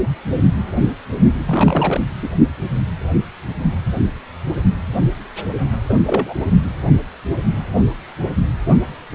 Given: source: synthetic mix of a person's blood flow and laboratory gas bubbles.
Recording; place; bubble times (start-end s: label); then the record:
Doppler ultrasound of blood flow; precordium
1.45-2.01 s: bubbles
2.22-2.29 s: bubbles
5.89-5.94 s: bubbles
6.07-6.34 s: bubbles
From the record:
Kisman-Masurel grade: 222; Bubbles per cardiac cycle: several, 3 to 8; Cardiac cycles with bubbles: 10 to 50%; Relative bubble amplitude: moderate (0.250 to 0.450); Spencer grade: 2 (many but less than half of the cardiac periods contain bubble signals, singularly or in groups); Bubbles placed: only in the low amplitude regions of the cardiac cycle